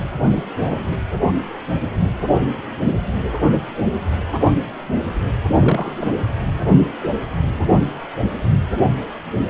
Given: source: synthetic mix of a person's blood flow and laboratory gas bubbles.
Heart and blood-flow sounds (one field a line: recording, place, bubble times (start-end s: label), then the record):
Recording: Doppler ultrasound of blood flow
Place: precordium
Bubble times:
0.32-0.43 s: bubbles
0.60-0.96 s: bubbles
5.49-5.92 s: bubbles
6.00-6.12 s: bubbles
From the record:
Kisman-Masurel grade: 222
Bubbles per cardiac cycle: several, 3 to 8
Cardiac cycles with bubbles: 10 to 50%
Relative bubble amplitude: moderate (0.250 to 0.450)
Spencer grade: 2 (many but less than half of the cardiac periods contain bubble signals, singularly or in groups)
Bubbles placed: anywhere in the cardiac cycle